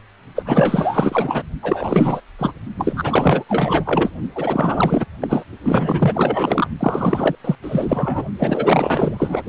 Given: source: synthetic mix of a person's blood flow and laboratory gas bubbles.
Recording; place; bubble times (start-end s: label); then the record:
Doppler ultrasound of blood flow; precordium
0.35-0.43 s: bubbles
0.46-1.43 s: bubbles
1.62-2.21 s: bubbles
2.38-2.52 s: bubbles
2.76-3.44 s: bubbles
3.48-4.10 s: bubbles
4.35-5.05 s: bubbles
5.21-5.44 s: bubbles
5.63-6.67 s: bubbles
6.79-7.35 s: bubbles
7.44-7.55 s: bubbles
7.62-8.25 s: bubbles
8.39-9.44 s: bubbles
From the record:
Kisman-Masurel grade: 444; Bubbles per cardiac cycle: continuous sound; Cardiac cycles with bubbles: 100%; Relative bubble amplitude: maximal (0.775 to 0.999); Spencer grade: 4 (maximum detectable bubble signal sounding continuously throughout systole and diastole of every cardiac period, and overriding the amplitude of the normal cardiac signals); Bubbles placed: only in the low amplitude regions of the cardiac cycle